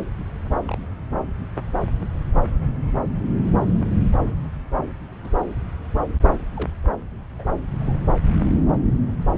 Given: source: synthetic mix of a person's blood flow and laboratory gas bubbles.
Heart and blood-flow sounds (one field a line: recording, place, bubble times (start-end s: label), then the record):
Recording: Doppler ultrasound of blood flow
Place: subclavian vein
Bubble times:
0.68-0.78 s: bubbles
5.24-5.29 s: bubbles
6.21-6.29 s: bubbles
6.56-6.70 s: bubbles
7.33-7.53 s: bubbles
7.79-7.97 s: bubbles
From the record:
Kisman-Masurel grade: 121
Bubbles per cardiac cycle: 1 to 2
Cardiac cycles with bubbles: 10 to 50%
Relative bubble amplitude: barely perceptible (0.100 to 0.250)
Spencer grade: 2 (many but less than half of the cardiac periods contain bubble signals, singularly or in groups)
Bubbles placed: anywhere in the cardiac cycle